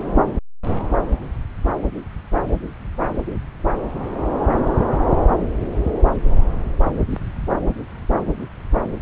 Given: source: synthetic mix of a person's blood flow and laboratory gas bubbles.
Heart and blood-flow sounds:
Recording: Doppler ultrasound of blood flow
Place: subclavian vein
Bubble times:
0.00-0.13 s: bubbles
7.10-7.19 s: bubbles
From the record:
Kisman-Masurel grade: 121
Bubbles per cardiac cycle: 1 to 2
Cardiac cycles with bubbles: 10 to 50%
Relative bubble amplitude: barely perceptible (0.100 to 0.250)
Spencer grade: 2 (many but less than half of the cardiac periods contain bubble signals, singularly or in groups)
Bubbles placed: anywhere in the cardiac cycle

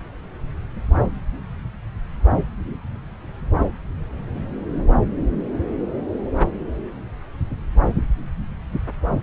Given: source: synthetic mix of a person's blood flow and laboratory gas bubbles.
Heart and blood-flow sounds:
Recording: Doppler ultrasound of blood flow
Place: subclavian vein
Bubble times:
no bubbles
From the record:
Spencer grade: 0 (complete lack of bubble signals)

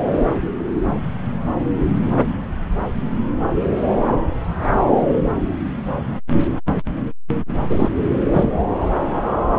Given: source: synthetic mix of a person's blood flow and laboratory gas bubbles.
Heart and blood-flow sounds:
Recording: Doppler ultrasound of blood flow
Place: subclavian vein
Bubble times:
7.69-7.89 s: bubbles
8.31-8.52 s: bubbles
From the record:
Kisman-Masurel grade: 212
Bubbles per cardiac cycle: several, 3 to 8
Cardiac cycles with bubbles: 1 to 10%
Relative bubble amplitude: moderate (0.250 to 0.450)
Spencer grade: 1 (occasional bubble signal discernible with the cardiac motion signal, with majority of cardiac periods free of bubbles)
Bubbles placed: anywhere in the cardiac cycle

